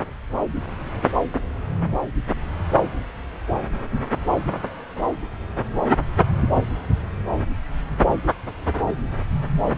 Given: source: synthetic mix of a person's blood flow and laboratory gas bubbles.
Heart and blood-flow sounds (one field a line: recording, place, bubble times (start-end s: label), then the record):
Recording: Doppler ultrasound of blood flow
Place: subclavian vein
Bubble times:
no bubbles
From the record:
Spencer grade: 0 (complete lack of bubble signals)